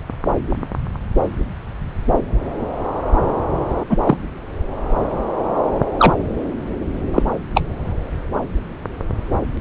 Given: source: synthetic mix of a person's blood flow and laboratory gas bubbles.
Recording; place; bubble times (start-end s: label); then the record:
Doppler ultrasound of blood flow; subclavian vein
3.90-3.97 s: bubbles
4.04-4.17 s: bubbles
5.98-6.15 s: bubbles
7.13-7.23 s: bubbles
7.54-7.62 s: bubbles
From the record:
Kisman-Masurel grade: 123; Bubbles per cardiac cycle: 1 to 2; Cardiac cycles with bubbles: 10 to 50%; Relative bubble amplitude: loud (0.450 to 0.775); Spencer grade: 2 (many but less than half of the cardiac periods contain bubble signals, singularly or in groups); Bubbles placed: anywhere in the cardiac cycle